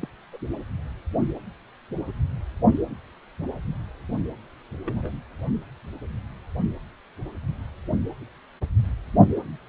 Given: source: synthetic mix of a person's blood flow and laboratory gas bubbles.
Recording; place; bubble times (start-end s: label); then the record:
Doppler ultrasound of blood flow; precordium
0.01-0.08 s: bubbles
0.32-0.38 s: bubbles
4.85-5.11 s: bubbles
From the record:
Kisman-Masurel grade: 121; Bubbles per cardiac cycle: 1 to 2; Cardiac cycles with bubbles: 10 to 50%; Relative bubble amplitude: barely perceptible (0.100 to 0.250); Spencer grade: 2 (many but less than half of the cardiac periods contain bubble signals, singularly or in groups); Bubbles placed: only in the low amplitude regions of the cardiac cycle